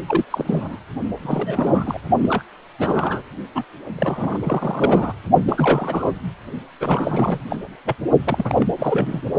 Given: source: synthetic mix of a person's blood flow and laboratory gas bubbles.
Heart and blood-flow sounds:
Doppler ultrasound of blood flow; precordium
0.07-0.24 s: bubbles
0.30-0.78 s: bubbles
1.22-1.98 s: bubbles
2.17-2.44 s: bubbles
2.79-3.23 s: bubbles
3.54-3.64 s: bubbles
3.98-4.38 s: bubbles
4.44-5.13 s: bubbles
5.46-6.11 s: bubbles
6.80-7.39 s: bubbles
7.50-7.58 s: bubbles
7.85-7.96 s: bubbles
8.24-8.65 s: bubbles
8.78-9.22 s: bubbles
From the record:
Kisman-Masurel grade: 342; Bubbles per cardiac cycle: rolling drumbeat, 9 or more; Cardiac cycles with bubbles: 100%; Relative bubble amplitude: moderate (0.250 to 0.450); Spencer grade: 3 (all of the cardiac periods contain showers or single bubble signals, but not dominating or overriding the cardiac motion signals); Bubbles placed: only in the low amplitude regions of the cardiac cycle

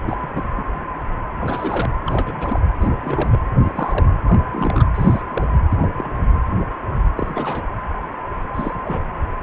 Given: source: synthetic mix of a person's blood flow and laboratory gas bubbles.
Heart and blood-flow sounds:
Doppler ultrasound of blood flow; precordium
0.07-0.17 s: bubbles
0.21-0.65 s: bubbles
1.40-1.89 s: bubbles
2.06-2.60 s: bubbles
2.81-2.88 s: bubbles
3.03-3.38 s: bubbles
3.63-4.07 s: bubbles
4.27-4.40 s: bubbles
4.52-4.84 s: bubbles
4.95-5.21 s: bubbles
5.30-5.46 s: bubbles
5.68-5.77 s: bubbles
5.82-5.90 s: bubbles
5.96-6.26 s: bubbles
7.17-7.65 s: bubbles
8.54-8.73 s: bubbles
8.84-9.01 s: bubbles
From the record:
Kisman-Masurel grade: 232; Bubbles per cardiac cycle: several, 3 to 8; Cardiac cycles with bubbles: 50 to 99%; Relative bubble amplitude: moderate (0.250 to 0.450); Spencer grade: 3 (all of the cardiac periods contain showers or single bubble signals, but not dominating or overriding the cardiac motion signals); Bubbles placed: anywhere in the cardiac cycle

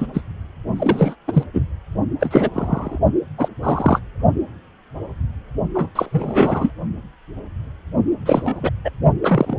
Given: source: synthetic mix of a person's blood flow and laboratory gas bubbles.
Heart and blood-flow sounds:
Doppler ultrasound of blood flow; precordium
0.00-0.07 s: bubbles
0.14-0.21 s: bubbles
0.76-1.15 s: bubbles
1.27-1.43 s: bubbles
1.53-1.65 s: bubbles
2.19-2.50 s: bubbles
2.53-2.99 s: bubbles
3.38-3.48 s: bubbles
3.62-3.99 s: bubbles
5.75-5.90 s: bubbles
5.95-6.71 s: bubbles
8.26-8.70 s: bubbles
8.85-8.91 s: bubbles
9.22-9.56 s: bubbles
From the record:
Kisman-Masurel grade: 233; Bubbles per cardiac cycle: several, 3 to 8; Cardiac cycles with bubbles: 50 to 99%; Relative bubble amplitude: loud (0.450 to 0.775); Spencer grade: 3 (all of the cardiac periods contain showers or single bubble signals, but not dominating or overriding the cardiac motion signals); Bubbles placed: only in the low amplitude regions of the cardiac cycle

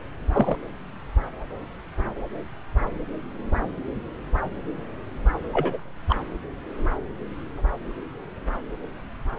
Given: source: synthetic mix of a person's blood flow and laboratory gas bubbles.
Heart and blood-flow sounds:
Doppler ultrasound of blood flow; subclavian vein
0.34-0.56 s: bubbles
5.53-5.78 s: bubbles
6.09-6.16 s: bubbles
From the record:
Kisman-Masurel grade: 122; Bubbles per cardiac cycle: 1 to 2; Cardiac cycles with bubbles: 10 to 50%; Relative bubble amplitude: moderate (0.250 to 0.450); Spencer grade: 2 (many but less than half of the cardiac periods contain bubble signals, singularly or in groups); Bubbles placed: anywhere in the cardiac cycle

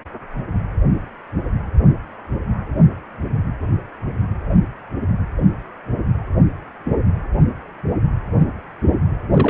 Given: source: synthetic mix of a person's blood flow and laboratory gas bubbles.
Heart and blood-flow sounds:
Doppler ultrasound of blood flow; precordium
9.31-9.50 s: bubbles
From the record:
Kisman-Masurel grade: 112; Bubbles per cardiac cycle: 1 to 2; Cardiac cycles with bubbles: 1 to 10%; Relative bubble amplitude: moderate (0.250 to 0.450); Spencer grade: 1 (occasional bubble signal discernible with the cardiac motion signal, with majority of cardiac periods free of bubbles); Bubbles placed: anywhere in the cardiac cycle

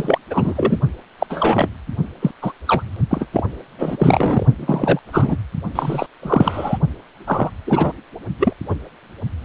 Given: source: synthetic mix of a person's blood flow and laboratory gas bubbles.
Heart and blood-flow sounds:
Doppler ultrasound of blood flow; precordium
0.00-0.18 s: bubbles
0.30-0.79 s: bubbles
1.19-1.26 s: bubbles
1.30-1.69 s: bubbles
2.21-2.31 s: bubbles
2.42-2.52 s: bubbles
2.67-2.83 s: bubbles
3.10-3.26 s: bubbles
3.33-3.44 s: bubbles
3.79-4.46 s: bubbles
4.59-5.00 s: bubbles
5.12-5.37 s: bubbles
5.75-6.07 s: bubbles
6.22-6.78 s: bubbles
7.26-7.50 s: bubbles
7.67-7.92 s: bubbles
8.39-8.53 s: bubbles
8.69-8.75 s: bubbles
From the record:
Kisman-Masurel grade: 233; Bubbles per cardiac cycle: several, 3 to 8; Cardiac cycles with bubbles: 50 to 99%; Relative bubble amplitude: loud (0.450 to 0.775); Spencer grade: 3 (all of the cardiac periods contain showers or single bubble signals, but not dominating or overriding the cardiac motion signals); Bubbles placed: only in the low amplitude regions of the cardiac cycle

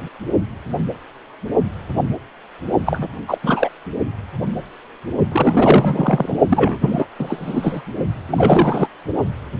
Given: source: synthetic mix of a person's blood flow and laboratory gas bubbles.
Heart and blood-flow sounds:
Doppler ultrasound of blood flow; precordium
2.86-3.07 s: bubbles
3.27-3.38 s: bubbles
3.42-3.69 s: bubbles
5.32-6.38 s: bubbles
6.49-7.06 s: bubbles
7.19-7.82 s: bubbles
8.29-8.88 s: bubbles
From the record:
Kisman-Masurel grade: 223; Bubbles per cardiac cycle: several, 3 to 8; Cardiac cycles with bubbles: 10 to 50%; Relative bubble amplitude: loud (0.450 to 0.775); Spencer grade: 2 (many but less than half of the cardiac periods contain bubble signals, singularly or in groups); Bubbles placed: only in the low amplitude regions of the cardiac cycle

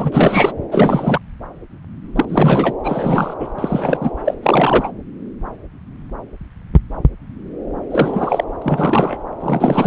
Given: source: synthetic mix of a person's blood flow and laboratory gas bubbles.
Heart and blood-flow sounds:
Doppler ultrasound of blood flow; subclavian vein
0.00-0.52 s: bubbles
0.71-1.19 s: bubbles
2.15-2.25 s: bubbles
2.29-2.74 s: bubbles
2.83-3.33 s: bubbles
3.40-3.48 s: bubbles
3.58-4.11 s: bubbles
4.25-4.34 s: bubbles
4.42-4.91 s: bubbles
7.91-8.44 s: bubbles
8.62-9.19 s: bubbles
9.41-9.86 s: bubbles
From the record:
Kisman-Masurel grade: 333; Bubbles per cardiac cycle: rolling drumbeat, 9 or more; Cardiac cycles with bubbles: 50 to 99%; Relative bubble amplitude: loud (0.450 to 0.775); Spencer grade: 3 (all of the cardiac periods contain showers or single bubble signals, but not dominating or overriding the cardiac motion signals); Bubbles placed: anywhere in the cardiac cycle

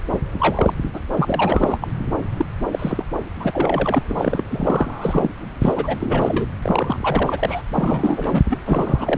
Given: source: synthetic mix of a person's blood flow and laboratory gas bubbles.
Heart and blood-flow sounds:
Doppler ultrasound of blood flow; subclavian vein
0.14-0.20 s: bubbles
0.40-0.72 s: bubbles
0.93-0.99 s: bubbles
1.17-1.78 s: bubbles
1.80-1.88 s: bubbles
2.36-2.45 s: bubbles
2.71-3.04 s: bubbles
3.40-3.50 s: bubbles
3.53-4.42 s: bubbles
4.50-5.29 s: bubbles
5.61-5.97 s: bubbles
6.00-6.46 s: bubbles
6.62-7.62 s: bubbles
7.76-8.44 s: bubbles
8.50-8.58 s: bubbles
8.66-9.18 s: bubbles
From the record:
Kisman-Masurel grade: 342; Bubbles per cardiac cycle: rolling drumbeat, 9 or more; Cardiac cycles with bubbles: 100%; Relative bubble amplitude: moderate (0.250 to 0.450); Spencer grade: 3 (all of the cardiac periods contain showers or single bubble signals, but not dominating or overriding the cardiac motion signals); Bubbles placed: anywhere in the cardiac cycle

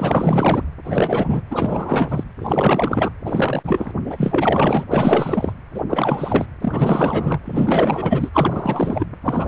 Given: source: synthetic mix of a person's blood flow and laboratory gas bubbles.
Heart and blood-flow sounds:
Doppler ultrasound of blood flow; precordium
0.00-0.63 s: bubbles
0.84-1.40 s: bubbles
1.50-2.23 s: bubbles
2.39-3.10 s: bubbles
3.25-3.92 s: bubbles
4.05-4.85 s: bubbles
4.88-5.53 s: bubbles
5.74-5.83 s: bubbles
5.89-6.46 s: bubbles
6.61-7.40 s: bubbles
7.45-8.29 s: bubbles
8.32-9.05 s: bubbles
9.22-9.48 s: bubbles
From the record:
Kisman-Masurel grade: 444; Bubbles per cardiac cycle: continuous sound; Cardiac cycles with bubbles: 100%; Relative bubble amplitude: maximal (0.775 to 0.999); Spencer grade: 4 (maximum detectable bubble signal sounding continuously throughout systole and diastole of every cardiac period, and overriding the amplitude of the normal cardiac signals); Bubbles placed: anywhere in the cardiac cycle

